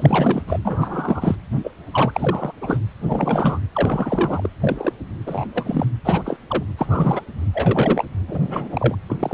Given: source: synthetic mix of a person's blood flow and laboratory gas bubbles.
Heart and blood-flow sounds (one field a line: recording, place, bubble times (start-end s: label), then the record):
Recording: Doppler ultrasound of blood flow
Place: precordium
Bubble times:
0.00-0.42 s: bubbles
0.47-0.59 s: bubbles
0.64-1.36 s: bubbles
1.50-1.71 s: bubbles
1.91-2.53 s: bubbles
2.61-2.79 s: bubbles
3.06-3.59 s: bubbles
3.75-4.50 s: bubbles
4.60-4.92 s: bubbles
5.26-5.48 s: bubbles
5.54-5.87 s: bubbles
6.04-6.23 s: bubbles
6.25-6.38 s: bubbles
6.48-6.63 s: bubbles
6.77-7.25 s: bubbles
7.54-8.04 s: bubbles
8.28-8.96 s: bubbles
9.10-9.33 s: bubbles
From the record:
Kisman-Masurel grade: 242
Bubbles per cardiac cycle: several, 3 to 8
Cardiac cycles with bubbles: 100%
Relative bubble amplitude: moderate (0.250 to 0.450)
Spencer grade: 3 (all of the cardiac periods contain showers or single bubble signals, but not dominating or overriding the cardiac motion signals)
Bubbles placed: anywhere in the cardiac cycle